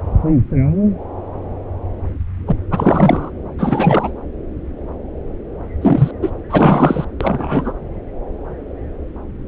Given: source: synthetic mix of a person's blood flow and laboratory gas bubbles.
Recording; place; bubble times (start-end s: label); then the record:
Doppler ultrasound of blood flow; subclavian vein
2.47-2.56 s: bubbles
2.71-3.31 s: bubbles
3.58-4.11 s: bubbles
5.81-6.11 s: bubbles
6.22-6.30 s: bubbles
6.49-7.05 s: bubbles
7.20-7.72 s: bubbles
From the record:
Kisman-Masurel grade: 223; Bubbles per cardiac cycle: several, 3 to 8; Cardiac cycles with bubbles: 10 to 50%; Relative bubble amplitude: loud (0.450 to 0.775); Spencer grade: 2 (many but less than half of the cardiac periods contain bubble signals, singularly or in groups); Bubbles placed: anywhere in the cardiac cycle